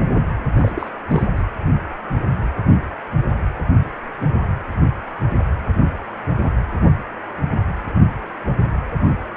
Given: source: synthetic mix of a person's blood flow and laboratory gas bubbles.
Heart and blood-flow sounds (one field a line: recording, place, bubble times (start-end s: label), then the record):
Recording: Doppler ultrasound of blood flow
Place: precordium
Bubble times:
0.58-0.72 s: bubbles
0.75-0.89 s: bubbles
1.07-1.27 s: bubbles
1.35-1.44 s: bubbles
From the record:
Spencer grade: 1 (occasional bubble signal discernible with the cardiac motion signal, with majority of cardiac periods free of bubbles)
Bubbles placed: anywhere in the cardiac cycle